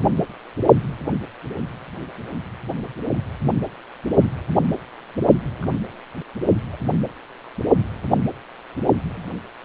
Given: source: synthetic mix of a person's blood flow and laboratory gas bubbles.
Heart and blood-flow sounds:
Doppler ultrasound of blood flow; precordium
0.00-0.09 s: bubbles
5.44-5.49 s: bubbles
5.59-5.77 s: bubbles
6.72-6.76 s: bubbles
9.13-9.37 s: bubbles
9.63-9.65 s: bubbles
From the record:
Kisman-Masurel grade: 121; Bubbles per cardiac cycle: 1 to 2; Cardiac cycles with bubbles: 10 to 50%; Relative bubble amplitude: barely perceptible (0.100 to 0.250); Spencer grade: 2 (many but less than half of the cardiac periods contain bubble signals, singularly or in groups); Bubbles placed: only in the low amplitude regions of the cardiac cycle

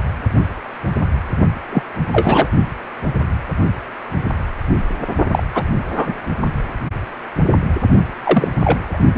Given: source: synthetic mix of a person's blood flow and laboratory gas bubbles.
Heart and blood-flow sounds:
Doppler ultrasound of blood flow; precordium
1.72-1.82 s: bubbles
2.12-2.48 s: bubbles
5.31-5.43 s: bubbles
5.54-5.63 s: bubbles
5.96-6.13 s: bubbles
8.25-8.49 s: bubbles
8.64-8.98 s: bubbles
9.15-9.18 s: bubbles
From the record:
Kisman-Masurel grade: 223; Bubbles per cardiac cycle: several, 3 to 8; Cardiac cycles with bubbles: 10 to 50%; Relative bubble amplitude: loud (0.450 to 0.775); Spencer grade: 2 (many but less than half of the cardiac periods contain bubble signals, singularly or in groups); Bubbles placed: only in the low amplitude regions of the cardiac cycle

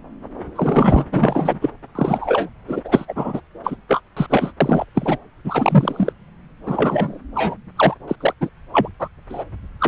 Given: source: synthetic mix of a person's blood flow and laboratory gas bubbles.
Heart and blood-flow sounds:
Doppler ultrasound of blood flow; subclavian vein
0.55-1.05 s: bubbles
1.11-1.70 s: bubbles
1.95-2.49 s: bubbles
2.67-2.81 s: bubbles
2.84-3.06 s: bubbles
3.08-3.41 s: bubbles
3.64-3.76 s: bubbles
3.88-4.01 s: bubbles
4.17-4.26 s: bubbles
4.29-4.52 s: bubbles
4.60-4.85 s: bubbles
4.94-5.17 s: bubbles
5.44-6.12 s: bubbles
6.65-7.19 s: bubbles
7.35-7.55 s: bubbles
7.76-7.95 s: bubbles
8.08-8.16 s: bubbles
8.20-8.34 s: bubbles
8.41-8.50 s: bubbles
8.73-8.88 s: bubbles
8.99-9.08 s: bubbles
9.29-9.44 s: bubbles
9.79-9.88 s: bubbles
From the record:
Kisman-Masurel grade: 233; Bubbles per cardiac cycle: several, 3 to 8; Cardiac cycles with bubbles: 50 to 99%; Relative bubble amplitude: loud (0.450 to 0.775); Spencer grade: 3 (all of the cardiac periods contain showers or single bubble signals, but not dominating or overriding the cardiac motion signals); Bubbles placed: anywhere in the cardiac cycle

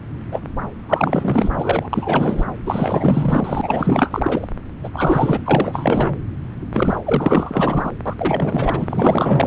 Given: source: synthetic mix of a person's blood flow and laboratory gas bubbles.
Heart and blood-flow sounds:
Doppler ultrasound of blood flow; subclavian vein
0.31-0.41 s: bubbles
0.89-1.49 s: bubbles
1.52-2.46 s: bubbles
2.66-4.48 s: bubbles
4.83-4.90 s: bubbles
4.92-5.41 s: bubbles
5.44-6.17 s: bubbles
6.73-6.98 s: bubbles
7.04-7.92 s: bubbles
8.05-9.47 s: bubbles
From the record:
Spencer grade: 4 (maximum detectable bubble signal sounding continuously throughout systole and diastole of every cardiac period, and overriding the amplitude of the normal cardiac signals); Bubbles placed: anywhere in the cardiac cycle

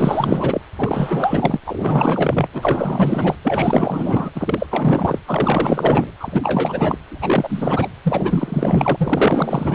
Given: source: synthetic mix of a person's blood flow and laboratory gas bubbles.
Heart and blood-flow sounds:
Doppler ultrasound of blood flow; precordium
0.00-0.61 s: bubbles
0.76-1.59 s: bubbles
1.66-2.47 s: bubbles
2.53-3.35 s: bubbles
3.43-4.30 s: bubbles
4.35-4.67 s: bubbles
4.70-5.19 s: bubbles
5.25-6.11 s: bubbles
6.19-6.98 s: bubbles
7.08-7.88 s: bubbles
8.04-9.74 s: bubbles
From the record:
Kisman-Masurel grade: 444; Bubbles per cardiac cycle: continuous sound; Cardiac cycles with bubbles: 100%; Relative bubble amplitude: maximal (0.775 to 0.999); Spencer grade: 4 (maximum detectable bubble signal sounding continuously throughout systole and diastole of every cardiac period, and overriding the amplitude of the normal cardiac signals); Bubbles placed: anywhere in the cardiac cycle

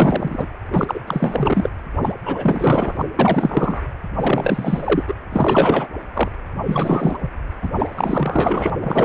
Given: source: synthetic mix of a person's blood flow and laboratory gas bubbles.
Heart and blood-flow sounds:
Doppler ultrasound of blood flow; precordium
0.00-0.48 s: bubbles
0.72-1.00 s: bubbles
1.06-1.70 s: bubbles
2.00-2.13 s: bubbles
2.25-3.05 s: bubbles
3.18-3.81 s: bubbles
4.18-5.04 s: bubbles
5.08-5.14 s: bubbles
5.32-5.87 s: bubbles
6.13-6.29 s: bubbles
6.66-7.32 s: bubbles
7.62-7.69 s: bubbles
7.74-8.70 s: bubbles
8.81-9.05 s: bubbles
From the record:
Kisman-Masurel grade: 444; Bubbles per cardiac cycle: continuous sound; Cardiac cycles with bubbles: 100%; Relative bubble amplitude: maximal (0.775 to 0.999); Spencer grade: 4 (maximum detectable bubble signal sounding continuously throughout systole and diastole of every cardiac period, and overriding the amplitude of the normal cardiac signals); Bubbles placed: anywhere in the cardiac cycle

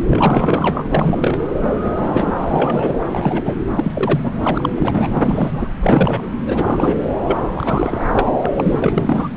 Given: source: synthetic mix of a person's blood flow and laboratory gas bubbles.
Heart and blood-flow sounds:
Doppler ultrasound of blood flow; subclavian vein
0.00-0.03 s: bubbles
0.10-0.81 s: bubbles
0.90-1.40 s: bubbles
1.62-1.75 s: bubbles
1.84-2.33 s: bubbles
2.38-2.97 s: bubbles
3.12-3.57 s: bubbles
3.75-4.32 s: bubbles
4.42-5.72 s: bubbles
5.79-6.28 s: bubbles
6.46-6.96 s: bubbles
7.25-7.38 s: bubbles
7.53-8.06 s: bubbles
8.13-8.34 s: bubbles
8.42-8.51 s: bubbles
8.56-8.79 s: bubbles
8.83-9.32 s: bubbles
From the record:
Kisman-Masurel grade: 342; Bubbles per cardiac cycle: rolling drumbeat, 9 or more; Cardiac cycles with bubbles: 100%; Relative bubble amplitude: moderate (0.250 to 0.450); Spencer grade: 3 (all of the cardiac periods contain showers or single bubble signals, but not dominating or overriding the cardiac motion signals); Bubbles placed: anywhere in the cardiac cycle

